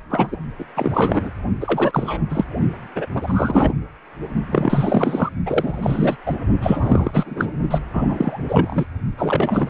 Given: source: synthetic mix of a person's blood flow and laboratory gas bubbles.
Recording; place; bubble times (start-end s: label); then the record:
Doppler ultrasound of blood flow; precordium
0.09-0.37 s: bubbles
0.59-0.65 s: bubbles
0.76-1.30 s: bubbles
1.61-2.44 s: bubbles
2.95-3.05 s: bubbles
3.15-3.74 s: bubbles
4.50-5.29 s: bubbles
5.46-6.17 s: bubbles
6.26-6.35 s: bubbles
6.61-7.47 s: bubbles
7.71-7.79 s: bubbles
7.93-8.85 s: bubbles
9.18-9.70 s: bubbles
From the record:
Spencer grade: 3 (all of the cardiac periods contain showers or single bubble signals, but not dominating or overriding the cardiac motion signals); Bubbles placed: only in the low amplitude regions of the cardiac cycle